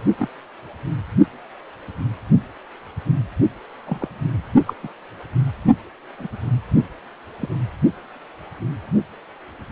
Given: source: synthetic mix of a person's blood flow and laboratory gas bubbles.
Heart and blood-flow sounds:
Doppler ultrasound of blood flow; precordium
0.18-0.28 s: bubbles
3.87-4.08 s: bubbles
4.67-4.73 s: bubbles
4.83-4.88 s: bubbles
6.19-6.27 s: bubbles
7.42-7.49 s: bubbles
From the record:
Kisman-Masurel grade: 122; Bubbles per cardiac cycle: 1 to 2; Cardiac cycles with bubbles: 10 to 50%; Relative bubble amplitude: moderate (0.250 to 0.450); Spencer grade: 2 (many but less than half of the cardiac periods contain bubble signals, singularly or in groups); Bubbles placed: only in the low amplitude regions of the cardiac cycle

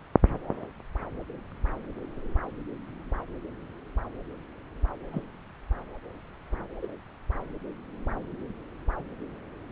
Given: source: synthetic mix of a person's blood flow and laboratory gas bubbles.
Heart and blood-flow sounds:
Doppler ultrasound of blood flow; subclavian vein
5.12-5.22 s: bubbles
6.82-6.87 s: bubbles
From the record:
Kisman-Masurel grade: 121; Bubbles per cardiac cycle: 1 to 2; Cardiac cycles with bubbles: 10 to 50%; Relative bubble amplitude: barely perceptible (0.100 to 0.250); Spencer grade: 2 (many but less than half of the cardiac periods contain bubble signals, singularly or in groups); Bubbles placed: anywhere in the cardiac cycle

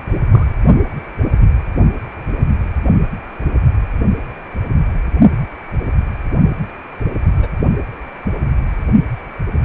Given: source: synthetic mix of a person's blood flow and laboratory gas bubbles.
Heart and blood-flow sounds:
Doppler ultrasound of blood flow; precordium
0.32-0.47 s: bubbles
7.37-7.49 s: bubbles
From the record:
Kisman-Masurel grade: 121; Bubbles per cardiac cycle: 1 to 2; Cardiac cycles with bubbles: 10 to 50%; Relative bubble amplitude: barely perceptible (0.100 to 0.250); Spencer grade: 2 (many but less than half of the cardiac periods contain bubble signals, singularly or in groups); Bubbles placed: only in the low amplitude regions of the cardiac cycle

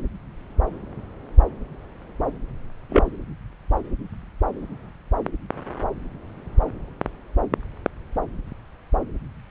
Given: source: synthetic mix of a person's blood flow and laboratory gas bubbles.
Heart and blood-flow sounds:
Doppler ultrasound of blood flow; subclavian vein
2.89-3.03 s: bubbles
From the record:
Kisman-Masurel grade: 112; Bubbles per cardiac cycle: 1 to 2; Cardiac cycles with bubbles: 1 to 10%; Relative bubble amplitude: moderate (0.250 to 0.450); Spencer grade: 1 (occasional bubble signal discernible with the cardiac motion signal, with majority of cardiac periods free of bubbles); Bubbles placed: anywhere in the cardiac cycle

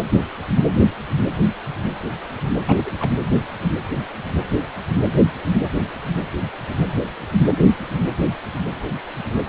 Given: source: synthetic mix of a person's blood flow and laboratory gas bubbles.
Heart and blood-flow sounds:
Doppler ultrasound of blood flow; precordium
2.66-3.12 s: bubbles
From the record:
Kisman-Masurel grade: 211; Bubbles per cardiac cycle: several, 3 to 8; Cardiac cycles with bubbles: 1 to 10%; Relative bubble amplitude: barely perceptible (0.100 to 0.250); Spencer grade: 1 (occasional bubble signal discernible with the cardiac motion signal, with majority of cardiac periods free of bubbles); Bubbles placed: anywhere in the cardiac cycle

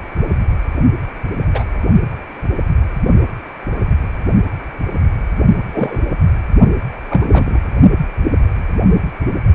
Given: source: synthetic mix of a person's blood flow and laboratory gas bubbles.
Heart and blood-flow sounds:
Doppler ultrasound of blood flow; precordium
1.52-1.65 s: bubbles
5.73-5.99 s: bubbles
7.09-7.59 s: bubbles
From the record:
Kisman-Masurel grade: 123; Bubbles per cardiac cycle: 1 to 2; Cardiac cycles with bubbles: 10 to 50%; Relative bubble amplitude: loud (0.450 to 0.775); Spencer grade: 2 (many but less than half of the cardiac periods contain bubble signals, singularly or in groups); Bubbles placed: only in the low amplitude regions of the cardiac cycle

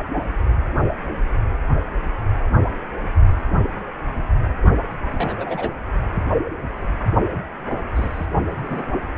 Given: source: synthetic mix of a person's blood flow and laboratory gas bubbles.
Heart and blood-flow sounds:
Doppler ultrasound of blood flow; precordium
5.11-5.71 s: bubbles
7.95-8.27 s: bubbles
8.62-8.84 s: bubbles
From the record:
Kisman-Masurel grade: 121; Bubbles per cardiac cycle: 1 to 2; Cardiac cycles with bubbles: 10 to 50%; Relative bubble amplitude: barely perceptible (0.100 to 0.250); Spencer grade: 2 (many but less than half of the cardiac periods contain bubble signals, singularly or in groups); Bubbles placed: only in the low amplitude regions of the cardiac cycle

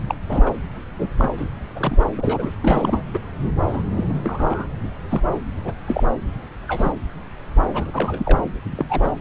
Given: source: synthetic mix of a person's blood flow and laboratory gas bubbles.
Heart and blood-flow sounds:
Doppler ultrasound of blood flow; subclavian vein
0.07-0.15 s: bubbles
0.29-0.51 s: bubbles
0.98-1.08 s: bubbles
1.17-1.27 s: bubbles
1.37-1.49 s: bubbles
1.75-1.97 s: bubbles
2.17-2.51 s: bubbles
2.62-3.03 s: bubbles
3.14-3.20 s: bubbles
3.68-3.83 s: bubbles
3.96-4.18 s: bubbles
4.24-4.67 s: bubbles
5.09-5.21 s: bubbles
5.59-5.74 s: bubbles
5.88-6.04 s: bubbles
6.68-6.92 s: bubbles
7.73-8.39 s: bubbles
8.75-8.86 s: bubbles
8.89-9.12 s: bubbles
From the record:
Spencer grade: 3 (all of the cardiac periods contain showers or single bubble signals, but not dominating or overriding the cardiac motion signals); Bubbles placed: anywhere in the cardiac cycle

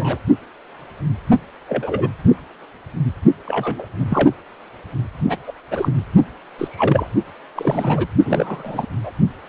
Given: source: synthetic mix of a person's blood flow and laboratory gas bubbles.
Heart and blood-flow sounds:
Doppler ultrasound of blood flow; precordium
0.00-0.19 s: bubbles
1.68-2.08 s: bubbles
2.29-2.36 s: bubbles
3.45-3.87 s: bubbles
3.97-4.30 s: bubbles
5.25-5.37 s: bubbles
5.47-5.53 s: bubbles
5.71-5.93 s: bubbles
6.58-7.10 s: bubbles
7.55-8.07 s: bubbles
8.26-8.88 s: bubbles
9.03-9.12 s: bubbles
From the record:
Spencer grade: 3 (all of the cardiac periods contain showers or single bubble signals, but not dominating or overriding the cardiac motion signals); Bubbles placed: only in the low amplitude regions of the cardiac cycle

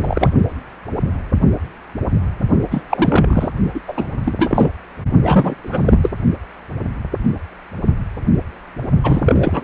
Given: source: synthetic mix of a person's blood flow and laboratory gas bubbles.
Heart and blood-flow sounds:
Doppler ultrasound of blood flow; precordium
0.00-0.30 s: bubbles
2.71-2.82 s: bubbles
2.90-3.49 s: bubbles
3.74-3.81 s: bubbles
3.88-4.07 s: bubbles
4.25-4.33 s: bubbles
4.38-4.70 s: bubbles
5.23-5.54 s: bubbles
5.63-6.10 s: bubbles
9.04-9.64 s: bubbles
From the record:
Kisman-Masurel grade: 333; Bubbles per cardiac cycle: rolling drumbeat, 9 or more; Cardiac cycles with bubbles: 50 to 99%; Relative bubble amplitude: loud (0.450 to 0.775); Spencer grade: 3 (all of the cardiac periods contain showers or single bubble signals, but not dominating or overriding the cardiac motion signals); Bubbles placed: only in the low amplitude regions of the cardiac cycle

